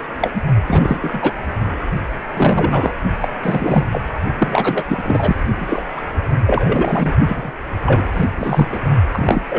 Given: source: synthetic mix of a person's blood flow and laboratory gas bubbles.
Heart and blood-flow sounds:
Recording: Doppler ultrasound of blood flow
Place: precordium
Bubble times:
0.19-0.32 s: bubbles
0.34-0.42 s: bubbles
0.67-0.98 s: bubbles
1.02-1.33 s: bubbles
2.35-2.92 s: bubbles
3.20-3.28 s: bubbles
3.42-3.86 s: bubbles
3.91-4.01 s: bubbles
4.38-4.84 s: bubbles
4.88-5.35 s: bubbles
5.60-5.83 s: bubbles
5.96-6.01 s: bubbles
6.46-7.13 s: bubbles
7.26-7.52 s: bubbles
7.85-8.04 s: bubbles
8.14-8.27 s: bubbles
8.37-8.67 s: bubbles
8.72-8.80 s: bubbles
9.11-9.42 s: bubbles
9.49-9.58 s: bubbles
From the record:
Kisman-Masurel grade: 343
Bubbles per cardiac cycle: rolling drumbeat, 9 or more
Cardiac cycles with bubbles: 100%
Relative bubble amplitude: loud (0.450 to 0.775)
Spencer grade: 3 (all of the cardiac periods contain showers or single bubble signals, but not dominating or overriding the cardiac motion signals)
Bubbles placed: only in the low amplitude regions of the cardiac cycle

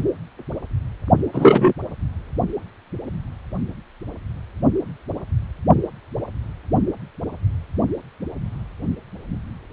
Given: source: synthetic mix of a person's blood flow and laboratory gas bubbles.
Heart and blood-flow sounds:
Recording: Doppler ultrasound of blood flow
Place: precordium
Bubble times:
1.33-1.73 s: bubbles
From the record:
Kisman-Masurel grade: 213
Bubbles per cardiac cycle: several, 3 to 8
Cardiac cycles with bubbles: 1 to 10%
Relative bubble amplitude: loud (0.450 to 0.775)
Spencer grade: 1 (occasional bubble signal discernible with the cardiac motion signal, with majority of cardiac periods free of bubbles)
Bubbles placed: only in the low amplitude regions of the cardiac cycle

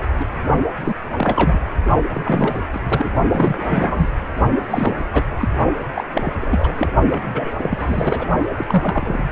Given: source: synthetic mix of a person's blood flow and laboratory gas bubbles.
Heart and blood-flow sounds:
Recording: Doppler ultrasound of blood flow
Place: precordium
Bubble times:
0.20-0.26 s: bubbles
0.85-0.95 s: bubbles
1.17-1.59 s: bubbles
2.13-2.59 s: bubbles
2.73-2.81 s: bubbles
2.88-3.09 s: bubbles
3.31-4.08 s: bubbles
4.70-5.05 s: bubbles
5.13-5.24 s: bubbles
5.38-5.48 s: bubbles
5.94-6.04 s: bubbles
6.14-6.31 s: bubbles
6.41-6.89 s: bubbles
7.11-7.51 s: bubbles
7.62-8.27 s: bubbles
8.47-8.55 s: bubbles
8.57-8.65 s: bubbles
8.68-9.23 s: bubbles
From the record:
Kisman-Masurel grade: 342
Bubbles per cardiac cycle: rolling drumbeat, 9 or more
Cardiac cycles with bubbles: 100%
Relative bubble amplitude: moderate (0.250 to 0.450)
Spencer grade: 3 (all of the cardiac periods contain showers or single bubble signals, but not dominating or overriding the cardiac motion signals)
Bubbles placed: only in the low amplitude regions of the cardiac cycle

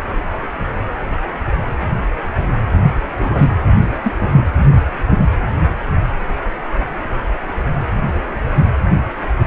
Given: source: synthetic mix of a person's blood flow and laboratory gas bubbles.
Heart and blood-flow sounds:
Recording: Doppler ultrasound of blood flow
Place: precordium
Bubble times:
3.19-3.51 s: bubbles
4.02-4.13 s: bubbles
4.20-4.43 s: bubbles
From the record:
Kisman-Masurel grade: 122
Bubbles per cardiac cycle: 1 to 2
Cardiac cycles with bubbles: 10 to 50%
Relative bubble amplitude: moderate (0.250 to 0.450)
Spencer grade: 2 (many but less than half of the cardiac periods contain bubble signals, singularly or in groups)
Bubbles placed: anywhere in the cardiac cycle

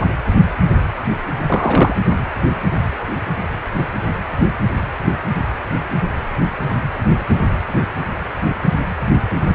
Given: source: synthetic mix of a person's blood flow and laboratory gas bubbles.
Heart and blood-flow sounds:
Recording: Doppler ultrasound of blood flow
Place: precordium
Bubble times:
1.47-1.96 s: bubbles
From the record:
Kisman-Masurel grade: 213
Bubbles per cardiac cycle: several, 3 to 8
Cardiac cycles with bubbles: 1 to 10%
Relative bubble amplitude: loud (0.450 to 0.775)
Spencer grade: 1 (occasional bubble signal discernible with the cardiac motion signal, with majority of cardiac periods free of bubbles)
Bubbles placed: anywhere in the cardiac cycle

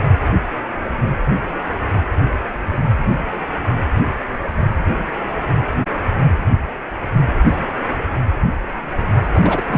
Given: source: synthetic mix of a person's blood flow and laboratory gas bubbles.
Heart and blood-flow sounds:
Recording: Doppler ultrasound of blood flow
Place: precordium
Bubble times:
9.32-9.64 s: bubbles
9.67-9.78 s: bubbles
From the record:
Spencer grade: 1 (occasional bubble signal discernible with the cardiac motion signal, with majority of cardiac periods free of bubbles)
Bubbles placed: anywhere in the cardiac cycle

